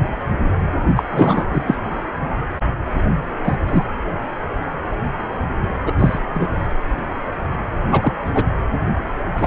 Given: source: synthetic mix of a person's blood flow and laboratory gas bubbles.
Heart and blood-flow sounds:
Doppler ultrasound of blood flow; precordium
0.96-1.03 s: bubbles
1.10-1.46 s: bubbles
1.52-1.62 s: bubbles
1.67-1.75 s: bubbles
3.44-3.56 s: bubbles
3.68-3.83 s: bubbles
5.86-5.92 s: bubbles
5.99-6.19 s: bubbles
6.34-6.47 s: bubbles
7.91-8.13 s: bubbles
8.34-8.45 s: bubbles
9.34-9.47 s: bubbles
From the record:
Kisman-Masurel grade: 223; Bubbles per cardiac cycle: several, 3 to 8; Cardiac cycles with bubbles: 10 to 50%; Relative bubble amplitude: loud (0.450 to 0.775); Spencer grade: 2 (many but less than half of the cardiac periods contain bubble signals, singularly or in groups); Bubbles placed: anywhere in the cardiac cycle

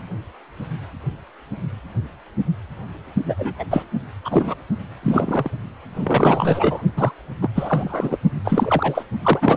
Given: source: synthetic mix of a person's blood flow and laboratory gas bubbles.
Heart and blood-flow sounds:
Doppler ultrasound of blood flow; precordium
3.25-3.35 s: bubbles
3.38-3.54 s: bubbles
3.59-3.65 s: bubbles
3.70-3.84 s: bubbles
4.24-4.54 s: bubbles
5.02-5.50 s: bubbles
5.95-6.82 s: bubbles
6.96-7.11 s: bubbles
7.41-7.49 s: bubbles
7.54-8.17 s: bubbles
8.45-9.03 s: bubbles
9.23-9.57 s: bubbles
From the record:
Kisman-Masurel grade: 333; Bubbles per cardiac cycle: rolling drumbeat, 9 or more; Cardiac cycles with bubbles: 50 to 99%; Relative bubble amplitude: loud (0.450 to 0.775); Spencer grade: 3 (all of the cardiac periods contain showers or single bubble signals, but not dominating or overriding the cardiac motion signals); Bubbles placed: only in the low amplitude regions of the cardiac cycle

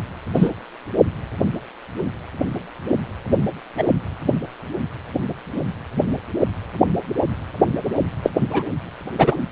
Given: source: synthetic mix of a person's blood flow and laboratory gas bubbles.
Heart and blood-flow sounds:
Doppler ultrasound of blood flow; precordium
0.34-0.49 s: bubbles
3.77-3.84 s: bubbles
8.23-8.31 s: bubbles
8.51-8.62 s: bubbles
9.18-9.35 s: bubbles
From the record:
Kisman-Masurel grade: 123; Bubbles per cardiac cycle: 1 to 2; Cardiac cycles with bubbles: 10 to 50%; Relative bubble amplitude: loud (0.450 to 0.775); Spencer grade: 2 (many but less than half of the cardiac periods contain bubble signals, singularly or in groups); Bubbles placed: anywhere in the cardiac cycle

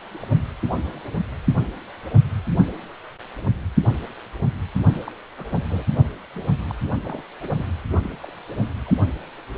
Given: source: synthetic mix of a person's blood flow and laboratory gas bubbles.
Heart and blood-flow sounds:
Doppler ultrasound of blood flow; precordium
0.21-0.27 s: bubbles
0.77-0.80 s: bubbles
0.84-1.04 s: bubbles
4.93-5.12 s: bubbles
5.37-5.64 s: bubbles
5.67-5.85 s: bubbles
6.36-6.63 s: bubbles
6.69-6.75 s: bubbles
7.04-7.23 s: bubbles
7.41-7.50 s: bubbles
7.54-7.67 s: bubbles
8.02-8.18 s: bubbles
8.21-8.34 s: bubbles
8.86-8.91 s: bubbles
From the record:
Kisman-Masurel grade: 221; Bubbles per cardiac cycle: several, 3 to 8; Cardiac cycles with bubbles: 10 to 50%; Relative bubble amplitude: barely perceptible (0.100 to 0.250); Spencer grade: 2 (many but less than half of the cardiac periods contain bubble signals, singularly or in groups); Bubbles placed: only in the low amplitude regions of the cardiac cycle

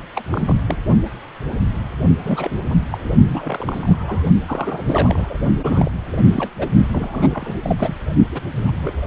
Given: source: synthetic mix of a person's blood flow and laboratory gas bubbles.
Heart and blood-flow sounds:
Doppler ultrasound of blood flow; precordium
0.16-0.23 s: bubbles
0.30-0.84 s: bubbles
2.23-2.59 s: bubbles
2.65-2.74 s: bubbles
2.92-2.98 s: bubbles
3.04-3.10 s: bubbles
3.27-4.24 s: bubbles
4.46-5.38 s: bubbles
5.63-5.96 s: bubbles
6.34-6.50 s: bubbles
6.58-6.67 s: bubbles
6.92-7.54 s: bubbles
7.62-7.95 s: bubbles
8.31-8.40 s: bubbles
8.53-8.94 s: bubbles
From the record:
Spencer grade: 3 (all of the cardiac periods contain showers or single bubble signals, but not dominating or overriding the cardiac motion signals); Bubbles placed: only in the low amplitude regions of the cardiac cycle

